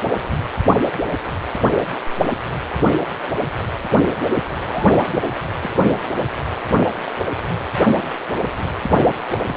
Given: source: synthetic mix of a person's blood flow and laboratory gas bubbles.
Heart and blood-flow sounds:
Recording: Doppler ultrasound of blood flow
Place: precordium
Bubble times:
4.19-4.29 s: bubbles
4.55-5.00 s: bubbles
5.08-5.21 s: bubbles
5.59-5.70 s: bubbles
9.32-9.38 s: bubbles
9.44-9.57 s: bubbles
From the record:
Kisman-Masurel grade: 121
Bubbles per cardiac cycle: 1 to 2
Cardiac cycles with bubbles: 10 to 50%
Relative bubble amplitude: barely perceptible (0.100 to 0.250)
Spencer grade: 2 (many but less than half of the cardiac periods contain bubble signals, singularly or in groups)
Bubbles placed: anywhere in the cardiac cycle

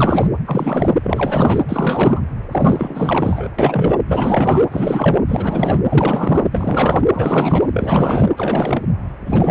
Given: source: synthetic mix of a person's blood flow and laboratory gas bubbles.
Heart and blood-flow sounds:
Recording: Doppler ultrasound of blood flow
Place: precordium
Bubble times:
0.00-0.27 s: bubbles
0.45-0.95 s: bubbles
1.03-1.62 s: bubbles
1.69-2.21 s: bubbles
2.51-3.48 s: bubbles
3.58-3.98 s: bubbles
4.08-4.64 s: bubbles
4.71-5.20 s: bubbles
5.28-5.79 s: bubbles
5.89-7.03 s: bubbles
7.12-7.69 s: bubbles
7.73-8.31 s: bubbles
8.37-8.84 s: bubbles
9.27-9.51 s: bubbles
From the record:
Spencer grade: 4 (maximum detectable bubble signal sounding continuously throughout systole and diastole of every cardiac period, and overriding the amplitude of the normal cardiac signals)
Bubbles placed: anywhere in the cardiac cycle

